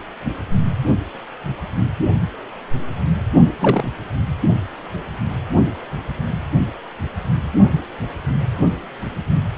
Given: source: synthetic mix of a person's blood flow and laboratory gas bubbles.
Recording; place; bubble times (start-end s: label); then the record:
Doppler ultrasound of blood flow; precordium
3.59-3.92 s: bubbles
From the record:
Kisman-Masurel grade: 123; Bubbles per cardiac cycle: 1 to 2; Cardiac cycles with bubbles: 10 to 50%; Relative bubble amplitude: loud (0.450 to 0.775); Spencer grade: 2 (many but less than half of the cardiac periods contain bubble signals, singularly or in groups); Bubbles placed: only in the low amplitude regions of the cardiac cycle